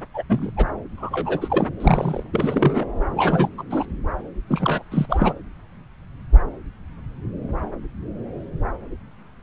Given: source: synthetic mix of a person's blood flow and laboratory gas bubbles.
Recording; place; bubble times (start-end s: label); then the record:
Doppler ultrasound of blood flow; subclavian vein
0.14-0.23 s: bubbles
0.29-0.51 s: bubbles
0.56-0.71 s: bubbles
0.97-1.65 s: bubbles
1.80-2.23 s: bubbles
2.32-2.83 s: bubbles
3.02-3.49 s: bubbles
3.57-3.63 s: bubbles
3.70-3.86 s: bubbles
4.49-4.83 s: bubbles
4.91-5.33 s: bubbles
From the record:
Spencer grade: 3 (all of the cardiac periods contain showers or single bubble signals, but not dominating or overriding the cardiac motion signals); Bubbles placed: anywhere in the cardiac cycle